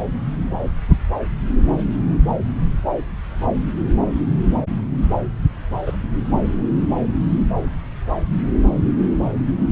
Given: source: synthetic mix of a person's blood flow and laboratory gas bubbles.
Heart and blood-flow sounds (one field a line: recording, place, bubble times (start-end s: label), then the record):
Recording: Doppler ultrasound of blood flow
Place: subclavian vein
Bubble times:
5.86-5.92 s: bubbles
From the record:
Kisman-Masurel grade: 112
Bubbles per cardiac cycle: 1 to 2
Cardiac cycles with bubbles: 1 to 10%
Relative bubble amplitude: moderate (0.250 to 0.450)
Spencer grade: 1 (occasional bubble signal discernible with the cardiac motion signal, with majority of cardiac periods free of bubbles)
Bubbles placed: anywhere in the cardiac cycle